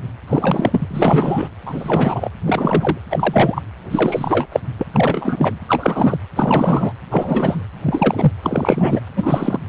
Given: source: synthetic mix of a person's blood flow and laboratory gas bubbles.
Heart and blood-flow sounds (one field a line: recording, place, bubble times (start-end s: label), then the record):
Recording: Doppler ultrasound of blood flow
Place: precordium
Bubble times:
0.27-0.86 s: bubbles
0.91-1.49 s: bubbles
1.66-2.29 s: bubbles
2.46-2.98 s: bubbles
3.09-3.62 s: bubbles
3.90-4.47 s: bubbles
4.52-4.60 s: bubbles
4.78-4.83 s: bubbles
4.93-5.59 s: bubbles
5.68-6.18 s: bubbles
6.36-6.92 s: bubbles
7.10-7.66 s: bubbles
7.83-8.32 s: bubbles
8.42-9.00 s: bubbles
9.16-9.59 s: bubbles
From the record:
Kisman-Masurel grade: 343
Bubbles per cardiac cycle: rolling drumbeat, 9 or more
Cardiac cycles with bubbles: 100%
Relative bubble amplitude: loud (0.450 to 0.775)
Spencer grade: 3 (all of the cardiac periods contain showers or single bubble signals, but not dominating or overriding the cardiac motion signals)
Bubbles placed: anywhere in the cardiac cycle